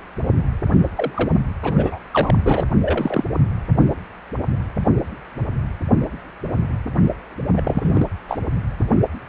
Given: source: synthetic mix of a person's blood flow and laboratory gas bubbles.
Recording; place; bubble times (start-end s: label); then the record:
Doppler ultrasound of blood flow; precordium
0.96-1.38 s: bubbles
1.63-1.99 s: bubbles
2.11-2.65 s: bubbles
2.83-3.25 s: bubbles
7.57-7.62 s: bubbles
7.65-8.07 s: bubbles
8.29-8.39 s: bubbles
From the record:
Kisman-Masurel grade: 223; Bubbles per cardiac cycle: several, 3 to 8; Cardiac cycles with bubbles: 10 to 50%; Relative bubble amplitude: loud (0.450 to 0.775); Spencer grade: 2 (many but less than half of the cardiac periods contain bubble signals, singularly or in groups); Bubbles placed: only in the low amplitude regions of the cardiac cycle